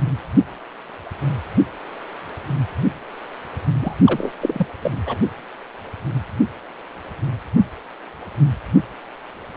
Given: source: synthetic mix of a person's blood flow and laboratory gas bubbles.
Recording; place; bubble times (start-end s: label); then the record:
Doppler ultrasound of blood flow; precordium
3.81-3.95 s: bubbles
4.04-4.33 s: bubbles
4.41-4.67 s: bubbles
4.82-4.91 s: bubbles
5.06-5.17 s: bubbles
From the record:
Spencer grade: 1 (occasional bubble signal discernible with the cardiac motion signal, with majority of cardiac periods free of bubbles); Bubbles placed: anywhere in the cardiac cycle